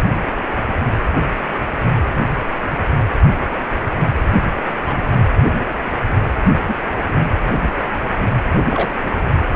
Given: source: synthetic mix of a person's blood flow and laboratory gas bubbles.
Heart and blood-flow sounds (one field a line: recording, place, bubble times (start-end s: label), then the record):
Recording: Doppler ultrasound of blood flow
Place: precordium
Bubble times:
4.73-5.09 s: bubbles
6.68-6.75 s: bubbles
7.03-7.09 s: bubbles
8.71-8.92 s: bubbles
9.10-9.19 s: bubbles
From the record:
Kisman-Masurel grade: 121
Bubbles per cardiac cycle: 1 to 2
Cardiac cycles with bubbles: 10 to 50%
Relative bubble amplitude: barely perceptible (0.100 to 0.250)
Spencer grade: 2 (many but less than half of the cardiac periods contain bubble signals, singularly or in groups)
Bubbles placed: anywhere in the cardiac cycle